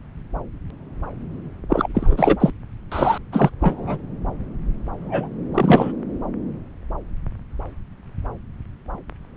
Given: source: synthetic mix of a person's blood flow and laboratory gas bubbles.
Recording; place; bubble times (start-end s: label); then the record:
Doppler ultrasound of blood flow; subclavian vein
1.69-1.88 s: bubbles
1.94-2.36 s: bubbles
2.40-2.50 s: bubbles
2.92-3.18 s: bubbles
3.32-3.50 s: bubbles
3.60-3.98 s: bubbles
5.02-5.29 s: bubbles
5.54-5.92 s: bubbles
From the record:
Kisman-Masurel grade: 223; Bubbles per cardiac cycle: several, 3 to 8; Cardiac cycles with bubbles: 10 to 50%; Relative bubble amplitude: loud (0.450 to 0.775); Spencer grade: 2 (many but less than half of the cardiac periods contain bubble signals, singularly or in groups); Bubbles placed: anywhere in the cardiac cycle